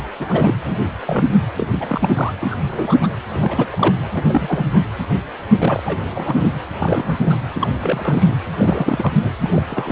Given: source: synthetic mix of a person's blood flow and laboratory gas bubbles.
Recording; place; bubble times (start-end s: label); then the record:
Doppler ultrasound of blood flow; precordium
0.20-0.55 s: bubbles
0.66-0.81 s: bubbles
0.99-1.34 s: bubbles
1.57-1.68 s: bubbles
1.71-2.10 s: bubbles
2.15-2.33 s: bubbles
2.39-2.56 s: bubbles
2.71-2.95 s: bubbles
3.00-3.08 s: bubbles
3.33-3.67 s: bubbles
3.71-3.96 s: bubbles
4.12-4.23 s: bubbles
4.29-4.83 s: bubbles
5.58-5.81 s: bubbles
5.84-5.97 s: bubbles
6.14-6.58 s: bubbles
6.79-7.18 s: bubbles
7.21-7.37 s: bubbles
7.54-7.68 s: bubbles
7.80-8.36 s: bubbles
8.58-9.13 s: bubbles
9.19-9.30 s: bubbles
9.40-9.62 s: bubbles
9.70-9.92 s: bubbles
From the record:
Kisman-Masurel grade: 242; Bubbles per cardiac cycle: several, 3 to 8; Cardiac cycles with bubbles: 100%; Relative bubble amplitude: moderate (0.250 to 0.450); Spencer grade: 3 (all of the cardiac periods contain showers or single bubble signals, but not dominating or overriding the cardiac motion signals); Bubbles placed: anywhere in the cardiac cycle